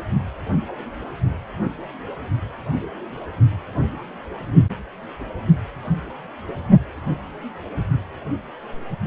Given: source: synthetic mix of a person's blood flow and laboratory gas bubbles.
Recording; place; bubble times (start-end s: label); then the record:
Doppler ultrasound of blood flow; precordium
no bubbles
From the record:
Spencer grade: 0 (complete lack of bubble signals)